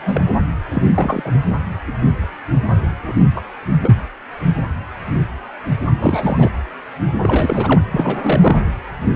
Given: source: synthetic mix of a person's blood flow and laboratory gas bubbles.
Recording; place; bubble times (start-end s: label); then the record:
Doppler ultrasound of blood flow; precordium
0.00-0.22 s: bubbles
0.74-0.83 s: bubbles
0.95-1.22 s: bubbles
1.24-1.32 s: bubbles
3.08-3.12 s: bubbles
3.35-3.42 s: bubbles
3.81-3.93 s: bubbles
5.99-6.50 s: bubbles
7.22-7.81 s: bubbles
7.91-8.61 s: bubbles
From the record:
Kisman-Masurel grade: 222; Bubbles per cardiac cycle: several, 3 to 8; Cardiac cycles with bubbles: 10 to 50%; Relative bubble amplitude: moderate (0.250 to 0.450); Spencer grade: 2 (many but less than half of the cardiac periods contain bubble signals, singularly or in groups); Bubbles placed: anywhere in the cardiac cycle